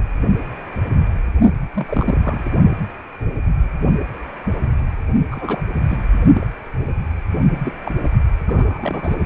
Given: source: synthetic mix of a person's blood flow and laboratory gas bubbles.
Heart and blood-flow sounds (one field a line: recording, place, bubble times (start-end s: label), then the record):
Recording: Doppler ultrasound of blood flow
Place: precordium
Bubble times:
1.74-2.51 s: bubbles
5.31-5.62 s: bubbles
5.88-5.97 s: bubbles
6.33-6.46 s: bubbles
7.64-7.72 s: bubbles
7.84-7.92 s: bubbles
8.04-8.09 s: bubbles
8.47-9.18 s: bubbles
From the record:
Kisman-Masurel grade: 222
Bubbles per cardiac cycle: several, 3 to 8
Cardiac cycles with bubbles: 10 to 50%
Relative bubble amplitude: moderate (0.250 to 0.450)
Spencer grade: 2 (many but less than half of the cardiac periods contain bubble signals, singularly or in groups)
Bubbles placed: only in the low amplitude regions of the cardiac cycle